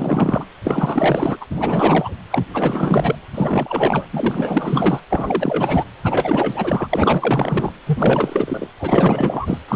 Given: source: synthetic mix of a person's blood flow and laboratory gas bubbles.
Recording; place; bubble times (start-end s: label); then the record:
Doppler ultrasound of blood flow; precordium
0.00-0.45 s: bubbles
0.64-1.37 s: bubbles
1.41-1.45 s: bubbles
1.50-2.15 s: bubbles
2.30-2.44 s: bubbles
2.53-3.16 s: bubbles
3.34-4.05 s: bubbles
4.12-5.00 s: bubbles
5.10-5.84 s: bubbles
6.04-7.72 s: bubbles
7.87-8.68 s: bubbles
8.80-9.58 s: bubbles
9.68-9.76 s: bubbles
From the record:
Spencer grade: 4 (maximum detectable bubble signal sounding continuously throughout systole and diastole of every cardiac period, and overriding the amplitude of the normal cardiac signals); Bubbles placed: anywhere in the cardiac cycle